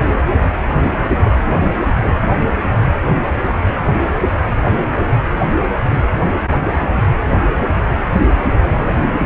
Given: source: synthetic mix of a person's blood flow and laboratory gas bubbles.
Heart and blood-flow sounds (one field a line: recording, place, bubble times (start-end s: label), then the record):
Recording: Doppler ultrasound of blood flow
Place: precordium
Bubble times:
2.03-2.13 s: bubbles
2.21-2.34 s: bubbles
6.62-6.80 s: bubbles
6.92-7.01 s: bubbles
7.24-7.38 s: bubbles
8.73-8.87 s: bubbles
From the record:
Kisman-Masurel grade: 121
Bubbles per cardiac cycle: 1 to 2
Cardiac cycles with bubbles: 10 to 50%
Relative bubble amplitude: barely perceptible (0.100 to 0.250)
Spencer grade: 2 (many but less than half of the cardiac periods contain bubble signals, singularly or in groups)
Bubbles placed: anywhere in the cardiac cycle